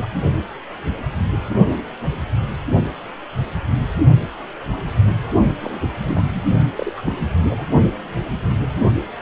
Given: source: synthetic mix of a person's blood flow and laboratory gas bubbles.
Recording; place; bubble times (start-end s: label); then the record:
Doppler ultrasound of blood flow; precordium
0.00-0.07 s: bubbles
5.61-5.79 s: bubbles
5.81-5.88 s: bubbles
6.02-6.24 s: bubbles
6.28-6.42 s: bubbles
6.77-6.92 s: bubbles
6.96-7.01 s: bubbles
7.05-7.17 s: bubbles
7.48-7.65 s: bubbles
From the record:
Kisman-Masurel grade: 221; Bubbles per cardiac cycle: several, 3 to 8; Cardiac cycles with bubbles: 10 to 50%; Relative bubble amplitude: barely perceptible (0.100 to 0.250); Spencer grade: 2 (many but less than half of the cardiac periods contain bubble signals, singularly or in groups); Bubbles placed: only in the low amplitude regions of the cardiac cycle